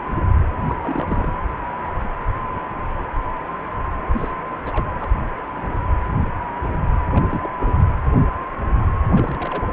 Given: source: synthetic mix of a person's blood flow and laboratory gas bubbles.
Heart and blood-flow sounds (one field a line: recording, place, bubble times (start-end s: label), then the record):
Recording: Doppler ultrasound of blood flow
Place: precordium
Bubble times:
0.69-0.75 s: bubbles
0.81-1.29 s: bubbles
4.13-4.34 s: bubbles
4.65-4.92 s: bubbles
5.00-5.10 s: bubbles
7.12-7.27 s: bubbles
7.31-7.53 s: bubbles
7.60-7.90 s: bubbles
9.13-9.62 s: bubbles
From the record:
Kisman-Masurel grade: 221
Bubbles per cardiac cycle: several, 3 to 8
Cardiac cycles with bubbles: 10 to 50%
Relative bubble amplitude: barely perceptible (0.100 to 0.250)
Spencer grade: 2 (many but less than half of the cardiac periods contain bubble signals, singularly or in groups)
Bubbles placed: anywhere in the cardiac cycle